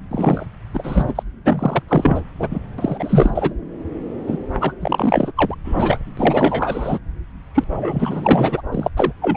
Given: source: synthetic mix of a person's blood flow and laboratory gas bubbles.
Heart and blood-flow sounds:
Doppler ultrasound of blood flow; subclavian vein
0.11-0.46 s: bubbles
0.74-1.23 s: bubbles
1.44-1.82 s: bubbles
1.88-2.21 s: bubbles
2.39-2.47 s: bubbles
2.50-2.59 s: bubbles
2.78-3.53 s: bubbles
4.26-4.38 s: bubbles
4.60-4.73 s: bubbles
4.80-5.32 s: bubbles
5.36-5.56 s: bubbles
5.64-6.04 s: bubbles
6.17-6.99 s: bubbles
7.54-7.64 s: bubbles
7.70-8.62 s: bubbles
8.71-8.89 s: bubbles
8.96-9.12 s: bubbles
9.21-9.37 s: bubbles
From the record:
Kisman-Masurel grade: 444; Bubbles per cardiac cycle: continuous sound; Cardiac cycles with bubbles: 100%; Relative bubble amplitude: maximal (0.775 to 0.999); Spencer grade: 4 (maximum detectable bubble signal sounding continuously throughout systole and diastole of every cardiac period, and overriding the amplitude of the normal cardiac signals); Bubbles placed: anywhere in the cardiac cycle

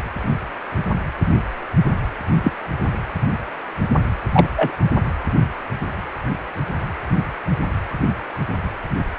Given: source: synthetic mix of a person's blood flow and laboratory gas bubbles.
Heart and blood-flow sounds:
Doppler ultrasound of blood flow; precordium
2.43-2.51 s: bubbles
4.33-4.48 s: bubbles
4.56-4.71 s: bubbles
From the record:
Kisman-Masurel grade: 123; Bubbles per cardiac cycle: 1 to 2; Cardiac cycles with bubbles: 10 to 50%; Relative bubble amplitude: loud (0.450 to 0.775); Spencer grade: 2 (many but less than half of the cardiac periods contain bubble signals, singularly or in groups); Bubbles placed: anywhere in the cardiac cycle

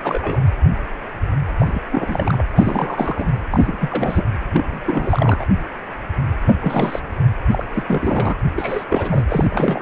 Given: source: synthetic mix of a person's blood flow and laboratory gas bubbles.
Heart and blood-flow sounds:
Doppler ultrasound of blood flow; precordium
0.03-0.44 s: bubbles
1.59-1.80 s: bubbles
1.91-2.42 s: bubbles
2.52-3.34 s: bubbles
3.51-4.23 s: bubbles
4.51-5.45 s: bubbles
6.44-7.00 s: bubbles
7.51-7.65 s: bubbles
7.73-7.83 s: bubbles
7.87-8.36 s: bubbles
8.48-8.52 s: bubbles
8.54-8.85 s: bubbles
8.88-9.26 s: bubbles
9.29-9.80 s: bubbles
From the record:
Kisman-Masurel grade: 332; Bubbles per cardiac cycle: rolling drumbeat, 9 or more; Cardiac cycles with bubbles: 50 to 99%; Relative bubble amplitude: moderate (0.250 to 0.450); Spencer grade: 3 (all of the cardiac periods contain showers or single bubble signals, but not dominating or overriding the cardiac motion signals); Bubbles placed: anywhere in the cardiac cycle

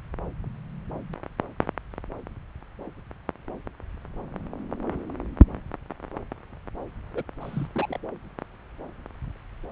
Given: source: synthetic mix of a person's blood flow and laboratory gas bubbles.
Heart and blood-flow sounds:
Doppler ultrasound of blood flow; subclavian vein
7.14-7.23 s: bubbles
7.40-7.67 s: bubbles
7.75-7.98 s: bubbles
From the record:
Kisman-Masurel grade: 211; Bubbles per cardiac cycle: several, 3 to 8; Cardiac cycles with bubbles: 1 to 10%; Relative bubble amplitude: barely perceptible (0.100 to 0.250); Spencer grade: 1 (occasional bubble signal discernible with the cardiac motion signal, with majority of cardiac periods free of bubbles); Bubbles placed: anywhere in the cardiac cycle

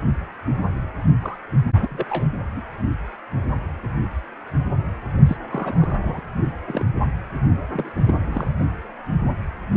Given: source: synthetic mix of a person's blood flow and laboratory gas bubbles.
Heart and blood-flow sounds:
Doppler ultrasound of blood flow; precordium
1.22-1.37 s: bubbles
1.75-2.04 s: bubbles
2.09-2.27 s: bubbles
2.54-2.62 s: bubbles
5.26-5.37 s: bubbles
5.51-5.99 s: bubbles
6.01-6.21 s: bubbles
6.67-6.83 s: bubbles
7.72-7.92 s: bubbles
7.95-8.49 s: bubbles
From the record:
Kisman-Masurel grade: 221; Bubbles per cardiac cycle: several, 3 to 8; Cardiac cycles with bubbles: 10 to 50%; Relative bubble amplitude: barely perceptible (0.100 to 0.250); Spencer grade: 2 (many but less than half of the cardiac periods contain bubble signals, singularly or in groups); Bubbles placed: only in the low amplitude regions of the cardiac cycle

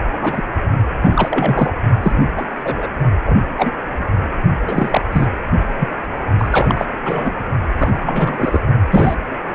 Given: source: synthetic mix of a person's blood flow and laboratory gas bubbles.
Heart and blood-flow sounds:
Doppler ultrasound of blood flow; precordium
0.20-0.42 s: bubbles
1.02-1.72 s: bubbles
2.03-2.16 s: bubbles
2.36-2.45 s: bubbles
2.63-2.87 s: bubbles
3.25-3.38 s: bubbles
3.57-3.71 s: bubbles
4.67-5.01 s: bubbles
5.11-5.26 s: bubbles
5.79-5.89 s: bubbles
6.39-6.86 s: bubbles
7.05-7.32 s: bubbles
7.77-7.99 s: bubbles
8.04-8.60 s: bubbles
8.91-9.15 s: bubbles
From the record:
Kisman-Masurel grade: 243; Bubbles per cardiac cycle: several, 3 to 8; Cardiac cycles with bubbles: 100%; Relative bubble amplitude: loud (0.450 to 0.775); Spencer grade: 3 (all of the cardiac periods contain showers or single bubble signals, but not dominating or overriding the cardiac motion signals); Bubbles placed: only in the low amplitude regions of the cardiac cycle

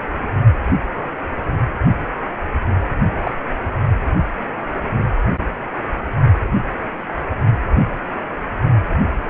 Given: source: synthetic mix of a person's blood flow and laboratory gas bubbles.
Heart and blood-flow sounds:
Doppler ultrasound of blood flow; precordium
3.23-3.32 s: bubbles
From the record:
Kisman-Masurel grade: 122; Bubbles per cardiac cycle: 1 to 2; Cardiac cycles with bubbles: 10 to 50%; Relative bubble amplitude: moderate (0.250 to 0.450); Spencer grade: 2 (many but less than half of the cardiac periods contain bubble signals, singularly or in groups); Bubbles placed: only in the low amplitude regions of the cardiac cycle

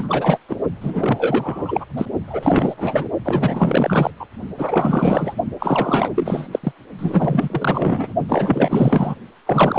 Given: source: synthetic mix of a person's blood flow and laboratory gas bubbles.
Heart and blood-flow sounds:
Doppler ultrasound of blood flow; precordium
0.00-0.39 s: bubbles
0.48-0.57 s: bubbles
0.80-1.85 s: bubbles
1.97-2.06 s: bubbles
2.27-3.09 s: bubbles
3.25-4.11 s: bubbles
4.19-4.26 s: bubbles
4.57-5.34 s: bubbles
5.59-6.12 s: bubbles
6.15-6.48 s: bubbles
6.52-6.59 s: bubbles
6.63-6.72 s: bubbles
6.99-8.14 s: bubbles
8.29-9.14 s: bubbles
9.46-9.79 s: bubbles
From the record:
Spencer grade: 4 (maximum detectable bubble signal sounding continuously throughout systole and diastole of every cardiac period, and overriding the amplitude of the normal cardiac signals); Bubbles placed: only in the low amplitude regions of the cardiac cycle

